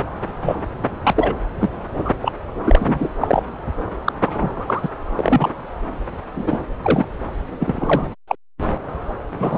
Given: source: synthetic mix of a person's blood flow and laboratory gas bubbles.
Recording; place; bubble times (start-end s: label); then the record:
Doppler ultrasound of blood flow; subclavian vein
0.00-0.03 s: bubbles
0.41-0.55 s: bubbles
1.03-1.12 s: bubbles
1.15-1.34 s: bubbles
1.60-1.70 s: bubbles
2.05-2.11 s: bubbles
2.22-2.32 s: bubbles
2.67-3.09 s: bubbles
3.21-3.43 s: bubbles
4.04-4.12 s: bubbles
4.24-4.90 s: bubbles
5.16-5.50 s: bubbles
6.35-6.59 s: bubbles
6.82-7.06 s: bubbles
7.60-8.06 s: bubbles
8.28-8.36 s: bubbles
9.39-9.58 s: bubbles
From the record:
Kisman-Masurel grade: 243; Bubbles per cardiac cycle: several, 3 to 8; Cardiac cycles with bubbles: 100%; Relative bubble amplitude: loud (0.450 to 0.775); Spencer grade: 3 (all of the cardiac periods contain showers or single bubble signals, but not dominating or overriding the cardiac motion signals); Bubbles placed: anywhere in the cardiac cycle